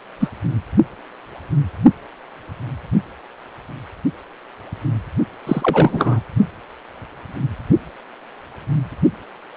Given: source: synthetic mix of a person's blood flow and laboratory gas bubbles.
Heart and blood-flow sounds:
Doppler ultrasound of blood flow; precordium
0.20-0.29 s: bubbles
5.46-6.21 s: bubbles
From the record:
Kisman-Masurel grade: 223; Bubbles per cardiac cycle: several, 3 to 8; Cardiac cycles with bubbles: 10 to 50%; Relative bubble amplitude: loud (0.450 to 0.775); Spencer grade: 2 (many but less than half of the cardiac periods contain bubble signals, singularly or in groups); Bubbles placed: only in the low amplitude regions of the cardiac cycle

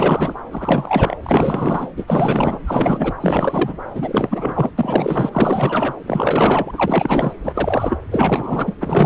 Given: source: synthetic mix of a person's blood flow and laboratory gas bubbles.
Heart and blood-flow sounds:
Doppler ultrasound of blood flow; subclavian vein
0.00-0.35 s: bubbles
0.51-1.16 s: bubbles
1.23-1.90 s: bubbles
1.96-2.04 s: bubbles
2.07-2.59 s: bubbles
2.66-3.14 s: bubbles
3.21-3.77 s: bubbles
3.94-4.71 s: bubbles
4.78-5.94 s: bubbles
6.03-7.33 s: bubbles
7.44-7.97 s: bubbles
8.11-8.74 s: bubbles
8.80-9.06 s: bubbles
From the record:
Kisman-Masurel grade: 444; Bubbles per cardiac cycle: continuous sound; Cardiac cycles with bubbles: 100%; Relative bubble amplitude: maximal (0.775 to 0.999); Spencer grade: 4 (maximum detectable bubble signal sounding continuously throughout systole and diastole of every cardiac period, and overriding the amplitude of the normal cardiac signals); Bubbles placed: anywhere in the cardiac cycle

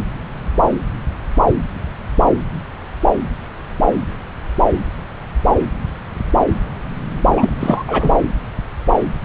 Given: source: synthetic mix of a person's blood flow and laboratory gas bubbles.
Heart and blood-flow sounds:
Doppler ultrasound of blood flow; subclavian vein
7.34-7.50 s: bubbles
7.60-7.83 s: bubbles
7.87-8.12 s: bubbles
From the record:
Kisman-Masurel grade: 213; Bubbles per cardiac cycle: several, 3 to 8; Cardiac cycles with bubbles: 1 to 10%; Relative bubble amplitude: loud (0.450 to 0.775); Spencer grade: 1 (occasional bubble signal discernible with the cardiac motion signal, with majority of cardiac periods free of bubbles); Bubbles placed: anywhere in the cardiac cycle

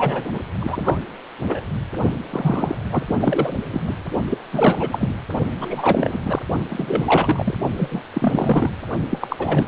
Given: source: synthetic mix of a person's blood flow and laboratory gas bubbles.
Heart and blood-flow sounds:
Doppler ultrasound of blood flow; precordium
0.00-0.25 s: bubbles
0.33-0.41 s: bubbles
0.60-0.99 s: bubbles
1.47-1.63 s: bubbles
2.30-2.77 s: bubbles
2.92-3.04 s: bubbles
3.07-3.59 s: bubbles
3.71-3.82 s: bubbles
3.86-3.96 s: bubbles
4.30-4.40 s: bubbles
4.53-5.14 s: bubbles
5.59-6.20 s: bubbles
6.22-6.39 s: bubbles
6.69-7.57 s: bubbles
7.77-8.02 s: bubbles
8.13-8.70 s: bubbles
9.10-9.68 s: bubbles
From the record:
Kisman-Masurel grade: 333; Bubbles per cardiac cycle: rolling drumbeat, 9 or more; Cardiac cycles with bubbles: 50 to 99%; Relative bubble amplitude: loud (0.450 to 0.775); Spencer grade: 3 (all of the cardiac periods contain showers or single bubble signals, but not dominating or overriding the cardiac motion signals); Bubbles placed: only in the low amplitude regions of the cardiac cycle

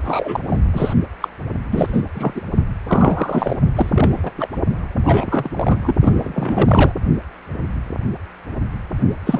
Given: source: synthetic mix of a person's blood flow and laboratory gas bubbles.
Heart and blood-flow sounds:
Doppler ultrasound of blood flow; precordium
0.03-0.40 s: bubbles
0.46-0.59 s: bubbles
0.73-0.94 s: bubbles
1.20-1.28 s: bubbles
1.71-2.02 s: bubbles
2.15-2.42 s: bubbles
2.88-3.56 s: bubbles
3.76-4.32 s: bubbles
4.38-4.48 s: bubbles
5.05-5.51 s: bubbles
5.56-5.96 s: bubbles
6.01-6.92 s: bubbles
9.26-9.40 s: bubbles
From the record:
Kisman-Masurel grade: 333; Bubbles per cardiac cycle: rolling drumbeat, 9 or more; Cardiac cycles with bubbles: 50 to 99%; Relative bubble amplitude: loud (0.450 to 0.775); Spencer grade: 3 (all of the cardiac periods contain showers or single bubble signals, but not dominating or overriding the cardiac motion signals); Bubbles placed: only in the low amplitude regions of the cardiac cycle

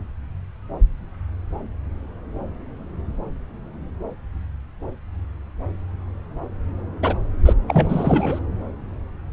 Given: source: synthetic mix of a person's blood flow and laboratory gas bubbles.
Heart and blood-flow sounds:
Doppler ultrasound of blood flow; subclavian vein
7.02-7.15 s: bubbles
7.45-7.53 s: bubbles
7.67-8.39 s: bubbles
From the record:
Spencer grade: 1 (occasional bubble signal discernible with the cardiac motion signal, with majority of cardiac periods free of bubbles); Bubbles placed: anywhere in the cardiac cycle

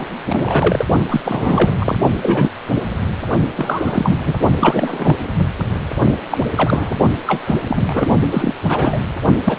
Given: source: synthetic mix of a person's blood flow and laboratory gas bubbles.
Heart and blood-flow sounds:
Doppler ultrasound of blood flow; precordium
0.00-0.07 s: bubbles
0.28-0.86 s: bubbles
1.08-1.21 s: bubbles
1.24-1.75 s: bubbles
1.78-1.97 s: bubbles
2.21-2.50 s: bubbles
3.57-4.38 s: bubbles
4.60-5.16 s: bubbles
5.39-5.46 s: bubbles
6.31-6.38 s: bubbles
6.54-6.95 s: bubbles
7.26-7.42 s: bubbles
7.46-7.56 s: bubbles
7.69-8.06 s: bubbles
8.30-8.54 s: bubbles
8.69-8.98 s: bubbles
9.45-9.58 s: bubbles
From the record:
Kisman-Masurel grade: 243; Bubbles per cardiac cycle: several, 3 to 8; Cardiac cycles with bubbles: 100%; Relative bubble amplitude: loud (0.450 to 0.775); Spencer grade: 3 (all of the cardiac periods contain showers or single bubble signals, but not dominating or overriding the cardiac motion signals); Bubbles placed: only in the low amplitude regions of the cardiac cycle

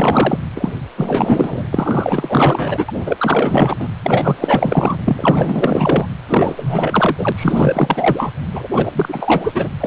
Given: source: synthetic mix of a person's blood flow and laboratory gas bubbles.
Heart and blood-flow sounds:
Doppler ultrasound of blood flow; precordium
0.00-0.39 s: bubbles
0.55-0.72 s: bubbles
0.97-1.69 s: bubbles
1.71-2.85 s: bubbles
2.88-3.88 s: bubbles
4.04-4.97 s: bubbles
5.05-6.08 s: bubbles
6.28-7.33 s: bubbles
7.35-8.31 s: bubbles
8.53-8.68 s: bubbles
8.71-9.68 s: bubbles
9.80-9.87 s: bubbles
From the record:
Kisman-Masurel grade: 444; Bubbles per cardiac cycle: continuous sound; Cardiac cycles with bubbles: 100%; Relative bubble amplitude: maximal (0.775 to 0.999); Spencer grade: 4 (maximum detectable bubble signal sounding continuously throughout systole and diastole of every cardiac period, and overriding the amplitude of the normal cardiac signals); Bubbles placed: anywhere in the cardiac cycle

